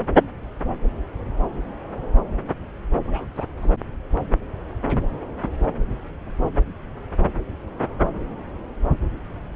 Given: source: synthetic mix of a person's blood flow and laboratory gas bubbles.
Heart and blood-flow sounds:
Doppler ultrasound of blood flow; subclavian vein
3.04-3.26 s: bubbles
3.36-3.45 s: bubbles
3.57-3.71 s: bubbles
From the record:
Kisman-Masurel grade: 211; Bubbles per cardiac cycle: several, 3 to 8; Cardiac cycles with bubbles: 1 to 10%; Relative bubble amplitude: barely perceptible (0.100 to 0.250); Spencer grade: 1 (occasional bubble signal discernible with the cardiac motion signal, with majority of cardiac periods free of bubbles); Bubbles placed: anywhere in the cardiac cycle

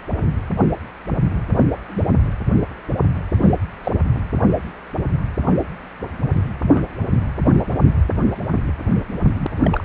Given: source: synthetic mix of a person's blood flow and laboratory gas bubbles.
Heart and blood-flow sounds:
Doppler ultrasound of blood flow; precordium
1.88-2.06 s: bubbles
3.34-3.50 s: bubbles
3.83-3.92 s: bubbles
6.75-6.81 s: bubbles
9.36-9.46 s: bubbles
9.63-9.85 s: bubbles
From the record:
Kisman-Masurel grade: 122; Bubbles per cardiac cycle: 1 to 2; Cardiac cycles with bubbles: 10 to 50%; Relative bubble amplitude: moderate (0.250 to 0.450); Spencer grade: 2 (many but less than half of the cardiac periods contain bubble signals, singularly or in groups); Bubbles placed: anywhere in the cardiac cycle

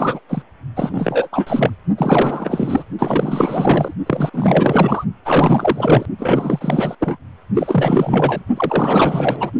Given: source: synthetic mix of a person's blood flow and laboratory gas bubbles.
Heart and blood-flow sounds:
Doppler ultrasound of blood flow; precordium
0.00-0.20 s: bubbles
0.29-0.42 s: bubbles
0.76-1.28 s: bubbles
1.31-1.71 s: bubbles
1.98-2.83 s: bubbles
2.98-3.94 s: bubbles
4.06-4.31 s: bubbles
4.33-5.04 s: bubbles
5.25-6.06 s: bubbles
6.19-6.95 s: bubbles
7.00-7.17 s: bubbles
7.54-8.44 s: bubbles
8.56-9.52 s: bubbles
From the record:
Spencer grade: 4 (maximum detectable bubble signal sounding continuously throughout systole and diastole of every cardiac period, and overriding the amplitude of the normal cardiac signals); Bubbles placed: only in the low amplitude regions of the cardiac cycle

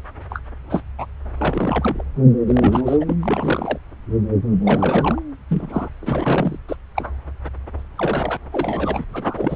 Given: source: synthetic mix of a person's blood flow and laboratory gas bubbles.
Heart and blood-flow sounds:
Doppler ultrasound of blood flow; subclavian vein
0.30-0.39 s: bubbles
0.69-0.83 s: bubbles
0.98-1.06 s: bubbles
1.39-2.03 s: bubbles
2.46-2.97 s: bubbles
3.00-3.16 s: bubbles
3.21-3.78 s: bubbles
4.63-5.22 s: bubbles
5.50-5.89 s: bubbles
6.01-6.58 s: bubbles
6.68-6.76 s: bubbles
6.96-7.12 s: bubbles
7.96-8.37 s: bubbles
8.52-9.04 s: bubbles
9.13-9.56 s: bubbles
From the record:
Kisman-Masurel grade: 232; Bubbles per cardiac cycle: several, 3 to 8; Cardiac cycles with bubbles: 50 to 99%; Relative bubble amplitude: moderate (0.250 to 0.450); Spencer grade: 3 (all of the cardiac periods contain showers or single bubble signals, but not dominating or overriding the cardiac motion signals); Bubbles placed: anywhere in the cardiac cycle

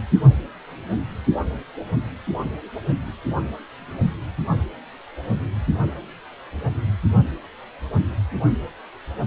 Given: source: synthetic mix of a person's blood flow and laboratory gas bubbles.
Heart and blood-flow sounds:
Doppler ultrasound of blood flow; precordium
2.88-2.94 s: bubbles
From the record:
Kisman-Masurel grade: 111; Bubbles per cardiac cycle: 1 to 2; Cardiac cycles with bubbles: 1 to 10%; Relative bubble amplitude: barely perceptible (0.100 to 0.250); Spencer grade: 1 (occasional bubble signal discernible with the cardiac motion signal, with majority of cardiac periods free of bubbles); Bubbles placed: only in the low amplitude regions of the cardiac cycle

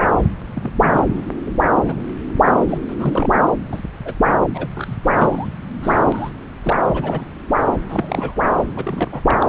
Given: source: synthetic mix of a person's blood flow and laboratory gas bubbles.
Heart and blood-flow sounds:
Doppler ultrasound of blood flow; subclavian vein
0.55-0.70 s: bubbles
0.81-1.05 s: bubbles
1.46-1.54 s: bubbles
1.72-1.95 s: bubbles
2.46-2.78 s: bubbles
2.89-2.95 s: bubbles
2.98-3.42 s: bubbles
3.71-3.81 s: bubbles
4.05-4.14 s: bubbles
4.54-4.67 s: bubbles
4.75-4.96 s: bubbles
5.03-5.11 s: bubbles
5.15-5.47 s: bubbles
5.82-6.29 s: bubbles
6.62-6.76 s: bubbles
6.93-7.25 s: bubbles
7.89-8.43 s: bubbles
8.76-9.20 s: bubbles
9.22-9.38 s: bubbles
9.41-9.46 s: bubbles
From the record:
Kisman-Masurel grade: 242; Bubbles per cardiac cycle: several, 3 to 8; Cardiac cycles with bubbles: 100%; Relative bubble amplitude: moderate (0.250 to 0.450); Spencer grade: 3 (all of the cardiac periods contain showers or single bubble signals, but not dominating or overriding the cardiac motion signals); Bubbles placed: anywhere in the cardiac cycle

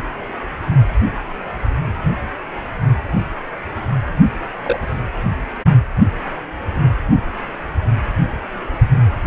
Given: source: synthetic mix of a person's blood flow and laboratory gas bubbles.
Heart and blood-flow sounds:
Doppler ultrasound of blood flow; precordium
4.62-4.79 s: bubbles
From the record:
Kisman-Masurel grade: 112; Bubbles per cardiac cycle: 1 to 2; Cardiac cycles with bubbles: 1 to 10%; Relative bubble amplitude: moderate (0.250 to 0.450); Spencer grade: 1 (occasional bubble signal discernible with the cardiac motion signal, with majority of cardiac periods free of bubbles); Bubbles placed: anywhere in the cardiac cycle

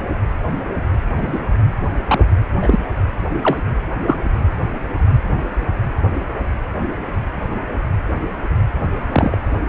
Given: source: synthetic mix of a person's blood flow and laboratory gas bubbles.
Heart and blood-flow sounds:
Doppler ultrasound of blood flow; precordium
1.16-1.39 s: bubbles
2.08-2.24 s: bubbles
2.62-2.79 s: bubbles
3.42-3.58 s: bubbles
4.07-4.16 s: bubbles
9.12-9.38 s: bubbles
9.67-9.69 s: bubbles
From the record:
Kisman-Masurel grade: 123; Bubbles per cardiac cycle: 1 to 2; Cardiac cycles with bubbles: 10 to 50%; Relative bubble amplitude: loud (0.450 to 0.775); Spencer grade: 2 (many but less than half of the cardiac periods contain bubble signals, singularly or in groups); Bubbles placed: anywhere in the cardiac cycle

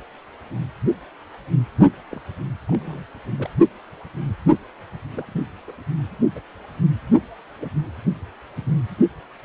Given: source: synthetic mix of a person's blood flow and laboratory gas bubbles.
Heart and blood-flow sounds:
Doppler ultrasound of blood flow; precordium
2.10-2.20 s: bubbles
2.67-3.03 s: bubbles
3.33-3.48 s: bubbles
5.14-5.25 s: bubbles
5.28-5.33 s: bubbles
5.68-5.72 s: bubbles
6.35-6.40 s: bubbles
7.61-7.68 s: bubbles
From the record:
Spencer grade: 2 (many but less than half of the cardiac periods contain bubble signals, singularly or in groups); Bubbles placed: anywhere in the cardiac cycle

